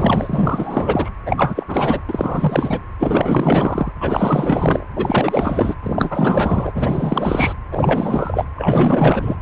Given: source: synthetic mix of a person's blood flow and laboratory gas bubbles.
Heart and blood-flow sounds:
Doppler ultrasound of blood flow; precordium
0.00-1.10 s: bubbles
1.26-1.63 s: bubbles
1.68-2.01 s: bubbles
2.08-2.79 s: bubbles
2.98-3.91 s: bubbles
4.00-4.86 s: bubbles
4.96-5.75 s: bubbles
5.83-7.54 s: bubbles
7.71-8.46 s: bubbles
8.55-9.37 s: bubbles
From the record:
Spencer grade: 4 (maximum detectable bubble signal sounding continuously throughout systole and diastole of every cardiac period, and overriding the amplitude of the normal cardiac signals); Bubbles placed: anywhere in the cardiac cycle

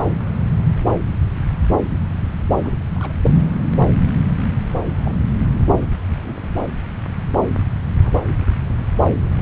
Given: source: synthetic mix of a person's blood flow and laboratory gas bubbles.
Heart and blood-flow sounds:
Doppler ultrasound of blood flow; subclavian vein
2.64-2.73 s: bubbles
2.95-3.13 s: bubbles
3.27-3.33 s: bubbles
4.97-5.15 s: bubbles
5.54-5.60 s: bubbles
5.80-5.86 s: bubbles
6.24-6.48 s: bubbles
7.95-8.22 s: bubbles
From the record:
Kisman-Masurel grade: 121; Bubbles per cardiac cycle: 1 to 2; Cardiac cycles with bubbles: 10 to 50%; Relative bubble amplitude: barely perceptible (0.100 to 0.250); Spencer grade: 2 (many but less than half of the cardiac periods contain bubble signals, singularly or in groups); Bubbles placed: anywhere in the cardiac cycle

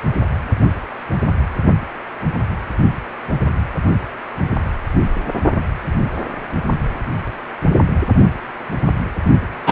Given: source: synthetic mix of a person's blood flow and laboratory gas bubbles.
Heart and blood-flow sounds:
Doppler ultrasound of blood flow; precordium
9.66-9.72 s: bubbles
From the record:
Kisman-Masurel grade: 113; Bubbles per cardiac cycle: 1 to 2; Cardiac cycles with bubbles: 1 to 10%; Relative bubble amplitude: loud (0.450 to 0.775); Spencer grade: 1 (occasional bubble signal discernible with the cardiac motion signal, with majority of cardiac periods free of bubbles); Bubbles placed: only in the low amplitude regions of the cardiac cycle

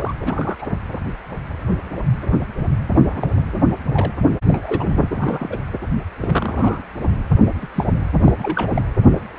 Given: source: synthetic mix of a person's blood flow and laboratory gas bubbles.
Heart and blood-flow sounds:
Doppler ultrasound of blood flow; precordium
0.00-0.15 s: bubbles
0.22-0.67 s: bubbles
3.07-3.29 s: bubbles
3.52-3.57 s: bubbles
3.92-4.12 s: bubbles
4.48-4.87 s: bubbles
4.97-5.58 s: bubbles
6.20-6.80 s: bubbles
7.58-7.66 s: bubbles
7.74-7.85 s: bubbles
8.20-8.33 s: bubbles
8.38-8.85 s: bubbles
From the record:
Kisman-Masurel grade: 232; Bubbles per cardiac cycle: several, 3 to 8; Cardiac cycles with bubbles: 50 to 99%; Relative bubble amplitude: moderate (0.250 to 0.450); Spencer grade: 3 (all of the cardiac periods contain showers or single bubble signals, but not dominating or overriding the cardiac motion signals); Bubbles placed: anywhere in the cardiac cycle

